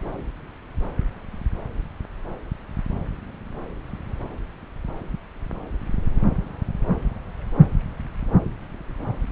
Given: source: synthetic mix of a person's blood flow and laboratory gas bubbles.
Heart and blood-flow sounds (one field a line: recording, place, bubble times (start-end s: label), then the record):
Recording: Doppler ultrasound of blood flow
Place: subclavian vein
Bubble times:
no bubbles
From the record:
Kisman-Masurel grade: 000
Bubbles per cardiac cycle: 0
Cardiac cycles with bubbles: 0%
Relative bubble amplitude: no bubbles discernible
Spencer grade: 0 (complete lack of bubble signals)